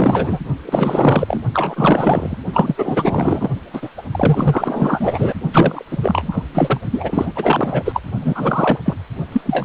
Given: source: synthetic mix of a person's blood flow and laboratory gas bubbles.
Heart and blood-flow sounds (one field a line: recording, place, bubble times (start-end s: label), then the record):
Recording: Doppler ultrasound of blood flow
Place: precordium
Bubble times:
0.00-0.39 s: bubbles
0.66-1.42 s: bubbles
1.53-2.37 s: bubbles
2.53-3.50 s: bubbles
3.73-3.90 s: bubbles
3.97-4.02 s: bubbles
4.12-5.35 s: bubbles
5.53-5.83 s: bubbles
5.90-5.98 s: bubbles
6.02-6.44 s: bubbles
6.53-6.80 s: bubbles
6.91-7.33 s: bubbles
7.35-8.00 s: bubbles
8.21-8.78 s: bubbles
8.85-8.95 s: bubbles
9.32-9.41 s: bubbles
9.46-9.65 s: bubbles
From the record:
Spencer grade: 4 (maximum detectable bubble signal sounding continuously throughout systole and diastole of every cardiac period, and overriding the amplitude of the normal cardiac signals)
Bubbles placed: only in the low amplitude regions of the cardiac cycle